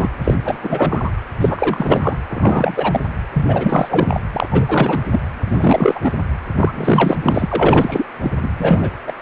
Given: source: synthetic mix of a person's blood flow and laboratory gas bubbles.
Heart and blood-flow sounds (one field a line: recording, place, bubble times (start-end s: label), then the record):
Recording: Doppler ultrasound of blood flow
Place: precordium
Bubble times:
0.00-0.09 s: bubbles
0.24-0.34 s: bubbles
0.45-0.59 s: bubbles
0.62-1.12 s: bubbles
1.40-2.18 s: bubbles
2.30-3.00 s: bubbles
3.33-4.21 s: bubbles
4.33-4.48 s: bubbles
4.51-5.03 s: bubbles
5.11-5.21 s: bubbles
5.45-6.12 s: bubbles
6.57-6.72 s: bubbles
6.75-7.17 s: bubbles
7.22-8.04 s: bubbles
8.22-8.31 s: bubbles
8.42-8.50 s: bubbles
8.57-8.91 s: bubbles
9.06-9.12 s: bubbles
From the record:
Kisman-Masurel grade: 343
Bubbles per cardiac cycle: rolling drumbeat, 9 or more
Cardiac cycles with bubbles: 100%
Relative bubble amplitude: loud (0.450 to 0.775)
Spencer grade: 3 (all of the cardiac periods contain showers or single bubble signals, but not dominating or overriding the cardiac motion signals)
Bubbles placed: anywhere in the cardiac cycle